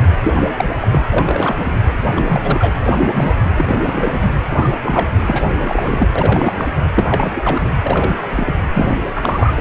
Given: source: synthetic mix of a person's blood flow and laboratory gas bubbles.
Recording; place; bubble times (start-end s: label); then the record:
Doppler ultrasound of blood flow; precordium
0.00-0.07 s: bubbles
0.24-0.70 s: bubbles
0.81-1.02 s: bubbles
1.09-1.55 s: bubbles
1.59-1.79 s: bubbles
2.14-2.75 s: bubbles
2.83-3.37 s: bubbles
3.56-4.32 s: bubbles
4.50-4.75 s: bubbles
4.83-5.10 s: bubbles
5.26-6.10 s: bubbles
6.15-6.53 s: bubbles
6.55-6.67 s: bubbles
6.94-7.31 s: bubbles
7.34-7.71 s: bubbles
7.83-8.54 s: bubbles
8.74-8.98 s: bubbles
9.15-9.54 s: bubbles
9.56-9.61 s: bubbles
From the record:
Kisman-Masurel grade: 342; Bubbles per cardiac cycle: rolling drumbeat, 9 or more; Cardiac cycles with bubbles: 100%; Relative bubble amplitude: moderate (0.250 to 0.450); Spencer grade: 3 (all of the cardiac periods contain showers or single bubble signals, but not dominating or overriding the cardiac motion signals); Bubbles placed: anywhere in the cardiac cycle